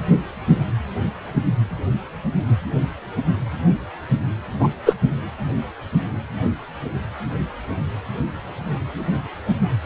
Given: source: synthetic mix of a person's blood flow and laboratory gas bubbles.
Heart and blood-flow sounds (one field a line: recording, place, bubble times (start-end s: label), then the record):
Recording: Doppler ultrasound of blood flow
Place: precordium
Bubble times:
4.60-4.68 s: bubbles
4.85-4.94 s: bubbles
From the record:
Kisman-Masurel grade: 113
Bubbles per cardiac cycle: 1 to 2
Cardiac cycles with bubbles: 1 to 10%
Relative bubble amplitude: loud (0.450 to 0.775)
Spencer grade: 1 (occasional bubble signal discernible with the cardiac motion signal, with majority of cardiac periods free of bubbles)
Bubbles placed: anywhere in the cardiac cycle